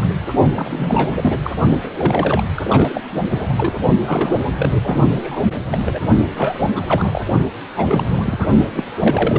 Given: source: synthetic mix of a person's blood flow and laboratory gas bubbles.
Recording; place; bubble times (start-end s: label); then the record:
Doppler ultrasound of blood flow; precordium
0.00-0.14 s: bubbles
0.55-1.40 s: bubbles
1.43-1.50 s: bubbles
1.84-1.90 s: bubbles
1.97-2.44 s: bubbles
2.57-3.01 s: bubbles
3.28-3.83 s: bubbles
4.05-4.42 s: bubbles
4.57-4.71 s: bubbles
4.81-5.43 s: bubbles
5.71-5.79 s: bubbles
5.85-5.99 s: bubbles
6.31-6.70 s: bubbles
6.75-7.25 s: bubbles
7.76-8.48 s: bubbles
8.74-8.85 s: bubbles
8.99-9.39 s: bubbles
From the record:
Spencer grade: 3 (all of the cardiac periods contain showers or single bubble signals, but not dominating or overriding the cardiac motion signals); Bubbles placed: only in the low amplitude regions of the cardiac cycle